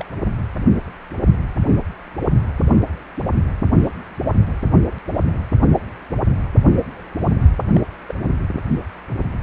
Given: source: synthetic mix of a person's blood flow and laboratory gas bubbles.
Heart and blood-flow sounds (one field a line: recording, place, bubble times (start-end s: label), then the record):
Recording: Doppler ultrasound of blood flow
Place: precordium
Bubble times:
0.00-0.05 s: bubbles
7.75-7.79 s: bubbles
8.08-8.15 s: bubbles
From the record:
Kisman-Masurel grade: 121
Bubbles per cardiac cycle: 1 to 2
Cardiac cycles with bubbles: 10 to 50%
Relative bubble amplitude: barely perceptible (0.100 to 0.250)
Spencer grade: 2 (many but less than half of the cardiac periods contain bubble signals, singularly or in groups)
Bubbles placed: anywhere in the cardiac cycle